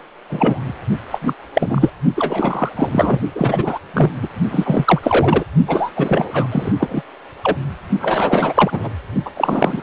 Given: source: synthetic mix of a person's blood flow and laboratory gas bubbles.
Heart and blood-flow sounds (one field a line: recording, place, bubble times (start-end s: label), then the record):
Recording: Doppler ultrasound of blood flow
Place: precordium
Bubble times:
0.30-0.80 s: bubbles
1.10-1.18 s: bubbles
1.21-1.33 s: bubbles
1.53-1.90 s: bubbles
2.17-2.70 s: bubbles
2.76-3.20 s: bubbles
3.35-3.79 s: bubbles
3.94-4.10 s: bubbles
4.22-4.28 s: bubbles
4.50-5.00 s: bubbles
5.03-5.44 s: bubbles
5.67-5.92 s: bubbles
5.96-6.47 s: bubbles
6.51-6.72 s: bubbles
6.78-7.02 s: bubbles
7.44-7.58 s: bubbles
8.01-8.89 s: bubbles
9.25-9.30 s: bubbles
9.36-9.82 s: bubbles
From the record:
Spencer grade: 3 (all of the cardiac periods contain showers or single bubble signals, but not dominating or overriding the cardiac motion signals)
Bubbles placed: only in the low amplitude regions of the cardiac cycle